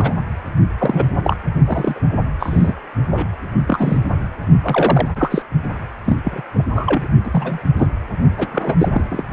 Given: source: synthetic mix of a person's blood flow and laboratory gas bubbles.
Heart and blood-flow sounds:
Doppler ultrasound of blood flow; precordium
0.00-0.16 s: bubbles
0.78-1.07 s: bubbles
1.23-1.37 s: bubbles
1.65-2.01 s: bubbles
2.40-2.73 s: bubbles
3.09-3.27 s: bubbles
3.67-3.99 s: bubbles
4.63-5.08 s: bubbles
5.16-5.42 s: bubbles
6.04-6.17 s: bubbles
6.25-6.42 s: bubbles
6.54-6.65 s: bubbles
6.74-7.07 s: bubbles
7.24-7.60 s: bubbles
7.76-7.87 s: bubbles
8.38-8.48 s: bubbles
8.52-8.89 s: bubbles
8.92-9.24 s: bubbles
From the record:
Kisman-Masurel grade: 242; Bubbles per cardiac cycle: several, 3 to 8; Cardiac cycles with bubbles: 100%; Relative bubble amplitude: moderate (0.250 to 0.450); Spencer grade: 3 (all of the cardiac periods contain showers or single bubble signals, but not dominating or overriding the cardiac motion signals); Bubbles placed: only in the low amplitude regions of the cardiac cycle

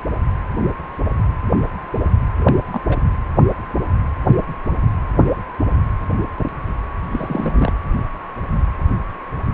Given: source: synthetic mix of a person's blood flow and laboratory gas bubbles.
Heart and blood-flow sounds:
Doppler ultrasound of blood flow; precordium
2.40-2.53 s: bubbles
2.71-2.81 s: bubbles
2.88-2.97 s: bubbles
7.11-7.73 s: bubbles
From the record:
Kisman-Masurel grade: 221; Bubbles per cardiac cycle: several, 3 to 8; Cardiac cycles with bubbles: 10 to 50%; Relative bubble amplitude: barely perceptible (0.100 to 0.250); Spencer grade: 2 (many but less than half of the cardiac periods contain bubble signals, singularly or in groups); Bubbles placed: anywhere in the cardiac cycle

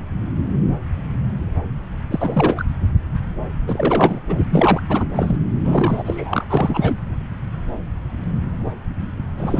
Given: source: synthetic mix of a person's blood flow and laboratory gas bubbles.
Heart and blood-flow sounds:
Doppler ultrasound of blood flow; subclavian vein
2.10-2.64 s: bubbles
3.68-4.20 s: bubbles
4.29-4.35 s: bubbles
4.38-4.46 s: bubbles
4.50-4.80 s: bubbles
4.89-5.04 s: bubbles
5.14-5.38 s: bubbles
5.65-6.45 s: bubbles
6.50-6.97 s: bubbles
9.37-9.60 s: bubbles
From the record:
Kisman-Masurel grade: 332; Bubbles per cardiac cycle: rolling drumbeat, 9 or more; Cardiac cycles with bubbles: 50 to 99%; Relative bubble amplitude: moderate (0.250 to 0.450); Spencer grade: 3 (all of the cardiac periods contain showers or single bubble signals, but not dominating or overriding the cardiac motion signals); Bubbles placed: anywhere in the cardiac cycle

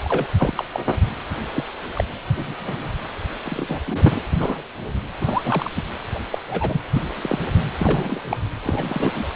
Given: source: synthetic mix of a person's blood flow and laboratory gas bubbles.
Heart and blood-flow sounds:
Doppler ultrasound of blood flow; precordium
0.04-0.28 s: bubbles
0.38-0.65 s: bubbles
0.72-0.80 s: bubbles
1.53-1.64 s: bubbles
1.95-2.04 s: bubbles
2.36-2.54 s: bubbles
2.59-2.89 s: bubbles
3.45-4.23 s: bubbles
4.33-4.36 s: bubbles
4.39-4.62 s: bubbles
5.21-5.70 s: bubbles
5.76-5.83 s: bubbles
6.13-6.20 s: bubbles
6.31-6.39 s: bubbles
6.48-6.81 s: bubbles
6.93-7.03 s: bubbles
7.23-7.39 s: bubbles
7.79-8.20 s: bubbles
8.31-8.37 s: bubbles
8.62-9.26 s: bubbles
From the record:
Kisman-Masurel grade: 242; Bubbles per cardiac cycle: several, 3 to 8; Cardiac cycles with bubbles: 100%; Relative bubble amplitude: moderate (0.250 to 0.450); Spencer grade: 3 (all of the cardiac periods contain showers or single bubble signals, but not dominating or overriding the cardiac motion signals); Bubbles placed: anywhere in the cardiac cycle

